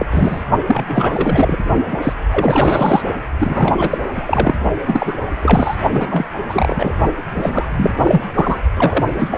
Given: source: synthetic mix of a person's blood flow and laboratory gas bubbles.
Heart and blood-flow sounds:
Doppler ultrasound of blood flow; precordium
0.00-0.06 s: bubbles
0.10-0.43 s: bubbles
0.67-1.58 s: bubbles
1.91-1.98 s: bubbles
2.02-2.13 s: bubbles
2.32-3.02 s: bubbles
3.39-3.98 s: bubbles
4.12-4.55 s: bubbles
4.86-5.17 s: bubbles
5.42-5.75 s: bubbles
5.92-6.25 s: bubbles
6.49-6.98 s: bubbles
7.34-7.66 s: bubbles
7.70-8.26 s: bubbles
8.34-8.57 s: bubbles
8.75-9.38 s: bubbles
From the record:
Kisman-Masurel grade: 343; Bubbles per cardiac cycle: rolling drumbeat, 9 or more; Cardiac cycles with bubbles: 100%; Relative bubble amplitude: loud (0.450 to 0.775); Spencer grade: 3 (all of the cardiac periods contain showers or single bubble signals, but not dominating or overriding the cardiac motion signals); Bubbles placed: only in the low amplitude regions of the cardiac cycle

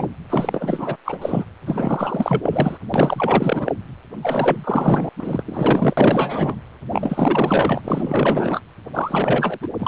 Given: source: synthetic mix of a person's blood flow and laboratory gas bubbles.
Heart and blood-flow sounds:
Doppler ultrasound of blood flow; precordium
0.00-0.09 s: bubbles
0.29-0.96 s: bubbles
1.04-1.44 s: bubbles
1.66-2.77 s: bubbles
2.94-3.72 s: bubbles
4.21-5.09 s: bubbles
5.18-5.43 s: bubbles
5.46-5.94 s: bubbles
5.97-6.56 s: bubbles
6.92-7.82 s: bubbles
7.84-8.60 s: bubbles
8.93-9.58 s: bubbles
9.62-9.67 s: bubbles
9.79-9.88 s: bubbles
From the record:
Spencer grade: 4 (maximum detectable bubble signal sounding continuously throughout systole and diastole of every cardiac period, and overriding the amplitude of the normal cardiac signals); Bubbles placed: anywhere in the cardiac cycle

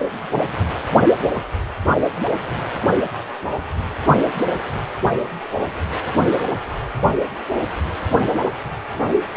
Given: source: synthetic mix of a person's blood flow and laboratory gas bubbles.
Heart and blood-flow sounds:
Doppler ultrasound of blood flow; precordium
no bubbles
From the record:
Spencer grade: 0 (complete lack of bubble signals)

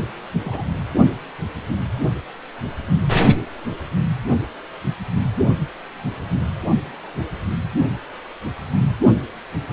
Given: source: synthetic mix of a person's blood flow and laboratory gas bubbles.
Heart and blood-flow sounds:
Doppler ultrasound of blood flow; precordium
0.41-0.65 s: bubbles
From the record:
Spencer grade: 2 (many but less than half of the cardiac periods contain bubble signals, singularly or in groups); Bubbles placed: only in the low amplitude regions of the cardiac cycle

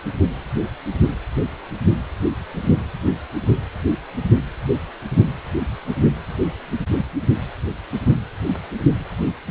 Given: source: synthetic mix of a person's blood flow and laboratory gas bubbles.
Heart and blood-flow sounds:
Doppler ultrasound of blood flow; precordium
no bubbles
From the record:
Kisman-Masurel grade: 000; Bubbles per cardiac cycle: 0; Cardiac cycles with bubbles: 0%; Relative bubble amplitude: no bubbles discernible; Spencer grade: 0 (complete lack of bubble signals)

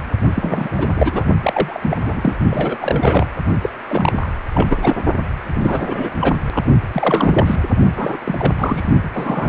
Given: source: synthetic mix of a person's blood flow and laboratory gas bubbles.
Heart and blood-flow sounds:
Doppler ultrasound of blood flow; precordium
0.36-0.69 s: bubbles
0.77-1.26 s: bubbles
1.43-1.97 s: bubbles
2.03-2.13 s: bubbles
2.16-2.35 s: bubbles
2.50-2.77 s: bubbles
2.80-3.27 s: bubbles
3.62-3.70 s: bubbles
3.89-4.29 s: bubbles
4.54-4.96 s: bubbles
5.55-6.10 s: bubbles
6.21-6.40 s: bubbles
6.50-6.63 s: bubbles
6.92-7.56 s: bubbles
7.96-8.17 s: bubbles
8.25-8.53 s: bubbles
8.58-8.89 s: bubbles
9.04-9.10 s: bubbles
9.13-9.49 s: bubbles
From the record:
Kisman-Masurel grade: 342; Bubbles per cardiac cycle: rolling drumbeat, 9 or more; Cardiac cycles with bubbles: 100%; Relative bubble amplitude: moderate (0.250 to 0.450); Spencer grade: 3 (all of the cardiac periods contain showers or single bubble signals, but not dominating or overriding the cardiac motion signals); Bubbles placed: only in the low amplitude regions of the cardiac cycle

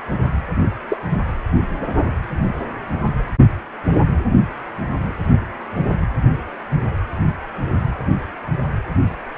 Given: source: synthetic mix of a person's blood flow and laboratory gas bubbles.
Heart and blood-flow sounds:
Doppler ultrasound of blood flow; precordium
0.88-0.97 s: bubbles
1.10-1.17 s: bubbles
From the record:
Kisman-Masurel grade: 123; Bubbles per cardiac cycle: 1 to 2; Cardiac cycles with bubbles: 10 to 50%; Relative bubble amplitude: loud (0.450 to 0.775); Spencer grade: 2 (many but less than half of the cardiac periods contain bubble signals, singularly or in groups); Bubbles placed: anywhere in the cardiac cycle

